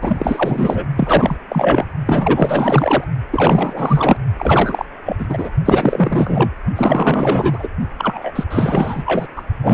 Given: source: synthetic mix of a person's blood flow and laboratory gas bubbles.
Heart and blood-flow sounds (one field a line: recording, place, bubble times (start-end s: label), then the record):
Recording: Doppler ultrasound of blood flow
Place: precordium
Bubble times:
0.02-0.84 s: bubbles
0.97-1.36 s: bubbles
1.49-1.85 s: bubbles
2.06-3.04 s: bubbles
3.31-4.17 s: bubbles
4.39-4.85 s: bubbles
5.05-5.26 s: bubbles
5.29-5.51 s: bubbles
5.65-6.51 s: bubbles
6.75-7.68 s: bubbles
7.97-8.31 s: bubbles
8.35-8.44 s: bubbles
8.49-9.26 s: bubbles
9.36-9.42 s: bubbles
9.62-9.74 s: bubbles
From the record:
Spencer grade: 4 (maximum detectable bubble signal sounding continuously throughout systole and diastole of every cardiac period, and overriding the amplitude of the normal cardiac signals)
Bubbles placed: only in the low amplitude regions of the cardiac cycle